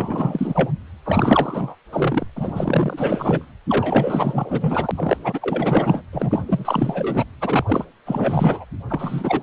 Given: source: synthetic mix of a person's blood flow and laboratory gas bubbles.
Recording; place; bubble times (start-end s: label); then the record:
Doppler ultrasound of blood flow; precordium
0.00-0.70 s: bubbles
1.05-1.76 s: bubbles
1.91-2.25 s: bubbles
2.36-3.46 s: bubbles
3.69-4.91 s: bubbles
4.94-6.01 s: bubbles
6.12-6.43 s: bubbles
6.46-7.24 s: bubbles
7.40-7.64 s: bubbles
7.67-7.85 s: bubbles
8.05-8.65 s: bubbles
8.89-9.43 s: bubbles
From the record:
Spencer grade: 4 (maximum detectable bubble signal sounding continuously throughout systole and diastole of every cardiac period, and overriding the amplitude of the normal cardiac signals); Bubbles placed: anywhere in the cardiac cycle